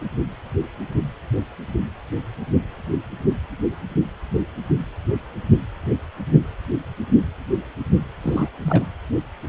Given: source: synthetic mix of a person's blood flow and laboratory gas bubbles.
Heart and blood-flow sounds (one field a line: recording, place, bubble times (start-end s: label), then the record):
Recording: Doppler ultrasound of blood flow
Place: precordium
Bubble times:
8.21-8.49 s: bubbles
8.62-8.86 s: bubbles
From the record:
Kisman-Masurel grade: 211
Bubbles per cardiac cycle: several, 3 to 8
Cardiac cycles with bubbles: 1 to 10%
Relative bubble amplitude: barely perceptible (0.100 to 0.250)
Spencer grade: 1 (occasional bubble signal discernible with the cardiac motion signal, with majority of cardiac periods free of bubbles)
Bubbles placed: anywhere in the cardiac cycle